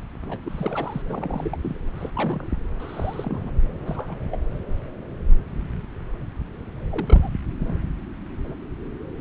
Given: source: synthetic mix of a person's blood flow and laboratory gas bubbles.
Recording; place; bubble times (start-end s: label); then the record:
Doppler ultrasound of blood flow; subclavian vein
0.22-0.37 s: bubbles
0.44-1.02 s: bubbles
1.07-1.57 s: bubbles
1.62-1.79 s: bubbles
1.98-2.10 s: bubbles
2.15-2.49 s: bubbles
2.79-3.50 s: bubbles
3.75-4.16 s: bubbles
4.32-4.37 s: bubbles
6.91-7.29 s: bubbles
7.59-7.74 s: bubbles
From the record:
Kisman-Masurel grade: 221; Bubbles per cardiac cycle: several, 3 to 8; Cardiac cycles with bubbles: 10 to 50%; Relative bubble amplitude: barely perceptible (0.100 to 0.250); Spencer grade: 2 (many but less than half of the cardiac periods contain bubble signals, singularly or in groups); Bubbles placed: anywhere in the cardiac cycle